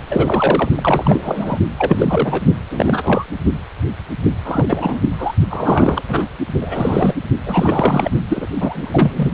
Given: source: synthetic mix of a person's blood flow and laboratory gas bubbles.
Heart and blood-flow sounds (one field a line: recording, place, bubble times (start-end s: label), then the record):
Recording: Doppler ultrasound of blood flow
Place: precordium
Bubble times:
0.08-0.70 s: bubbles
0.75-1.59 s: bubbles
1.78-2.43 s: bubbles
2.70-3.24 s: bubbles
4.44-5.09 s: bubbles
5.18-5.33 s: bubbles
5.50-6.02 s: bubbles
6.08-6.26 s: bubbles
6.61-7.14 s: bubbles
7.46-8.11 s: bubbles
8.29-8.47 s: bubbles
8.60-9.30 s: bubbles
From the record:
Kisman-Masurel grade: 343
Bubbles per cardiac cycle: rolling drumbeat, 9 or more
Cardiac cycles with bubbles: 100%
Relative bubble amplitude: loud (0.450 to 0.775)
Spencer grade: 3 (all of the cardiac periods contain showers or single bubble signals, but not dominating or overriding the cardiac motion signals)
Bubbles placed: only in the low amplitude regions of the cardiac cycle